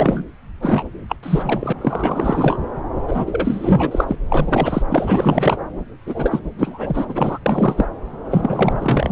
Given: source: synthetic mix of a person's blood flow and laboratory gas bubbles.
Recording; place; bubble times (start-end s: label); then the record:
Doppler ultrasound of blood flow; subclavian vein
0.00-0.25 s: bubbles
0.62-0.84 s: bubbles
1.08-1.16 s: bubbles
1.23-1.73 s: bubbles
1.81-2.57 s: bubbles
3.07-4.04 s: bubbles
4.07-4.16 s: bubbles
4.32-4.82 s: bubbles
4.89-5.57 s: bubbles
6.06-6.39 s: bubbles
6.58-7.06 s: bubbles
7.08-7.38 s: bubbles
7.45-7.86 s: bubbles
8.30-9.12 s: bubbles
From the record:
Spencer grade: 4 (maximum detectable bubble signal sounding continuously throughout systole and diastole of every cardiac period, and overriding the amplitude of the normal cardiac signals); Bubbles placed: anywhere in the cardiac cycle